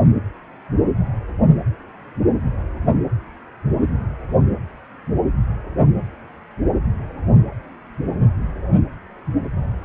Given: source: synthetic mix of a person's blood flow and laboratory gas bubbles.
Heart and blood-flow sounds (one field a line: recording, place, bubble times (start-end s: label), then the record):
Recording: Doppler ultrasound of blood flow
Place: precordium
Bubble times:
no bubbles
From the record:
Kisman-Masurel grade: 000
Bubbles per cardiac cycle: 0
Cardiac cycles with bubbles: 0%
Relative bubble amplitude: no bubbles discernible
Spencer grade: 0 (complete lack of bubble signals)